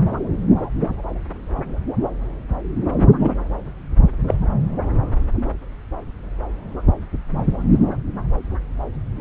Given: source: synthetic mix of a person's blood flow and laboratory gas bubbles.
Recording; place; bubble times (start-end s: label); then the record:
Doppler ultrasound of blood flow; subclavian vein
3.19-3.34 s: bubbles
4.28-4.34 s: bubbles
From the record:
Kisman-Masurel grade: 123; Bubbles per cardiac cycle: 1 to 2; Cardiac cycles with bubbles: 10 to 50%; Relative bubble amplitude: loud (0.450 to 0.775); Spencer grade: 2 (many but less than half of the cardiac periods contain bubble signals, singularly or in groups); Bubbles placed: anywhere in the cardiac cycle